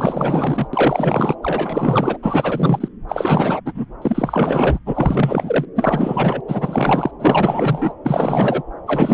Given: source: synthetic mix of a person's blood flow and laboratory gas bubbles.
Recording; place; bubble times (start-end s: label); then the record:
Doppler ultrasound of blood flow; subclavian vein
0.00-0.68 s: bubbles
0.73-1.35 s: bubbles
1.42-2.17 s: bubbles
2.22-2.89 s: bubbles
3.08-3.60 s: bubbles
3.65-3.85 s: bubbles
4.02-4.79 s: bubbles
4.86-5.65 s: bubbles
5.75-6.41 s: bubbles
6.48-7.11 s: bubbles
7.20-7.92 s: bubbles
8.05-8.62 s: bubbles
8.87-9.14 s: bubbles
From the record:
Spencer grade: 4 (maximum detectable bubble signal sounding continuously throughout systole and diastole of every cardiac period, and overriding the amplitude of the normal cardiac signals); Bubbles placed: anywhere in the cardiac cycle